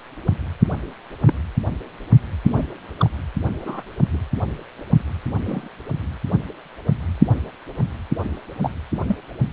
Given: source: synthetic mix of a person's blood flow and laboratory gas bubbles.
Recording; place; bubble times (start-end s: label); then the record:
Doppler ultrasound of blood flow; precordium
1.27-1.34 s: bubbles
2.44-2.65 s: bubbles
2.97-3.09 s: bubbles
3.65-3.83 s: bubbles
4.12-4.18 s: bubbles
5.46-5.67 s: bubbles
8.62-8.71 s: bubbles
9.07-9.18 s: bubbles
From the record:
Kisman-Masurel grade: 122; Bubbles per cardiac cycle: 1 to 2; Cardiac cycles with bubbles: 10 to 50%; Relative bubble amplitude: moderate (0.250 to 0.450); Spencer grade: 2 (many but less than half of the cardiac periods contain bubble signals, singularly or in groups); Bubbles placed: anywhere in the cardiac cycle